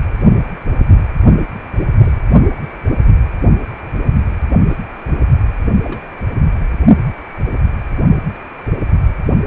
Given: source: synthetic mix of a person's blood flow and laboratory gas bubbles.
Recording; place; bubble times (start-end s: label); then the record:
Doppler ultrasound of blood flow; precordium
1.98-2.12 s: bubbles
4.68-4.77 s: bubbles
5.08-5.14 s: bubbles
5.83-6.01 s: bubbles
From the record:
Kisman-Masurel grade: 121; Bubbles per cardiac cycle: 1 to 2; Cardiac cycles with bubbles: 10 to 50%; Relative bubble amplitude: barely perceptible (0.100 to 0.250); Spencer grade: 2 (many but less than half of the cardiac periods contain bubble signals, singularly or in groups); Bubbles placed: only in the low amplitude regions of the cardiac cycle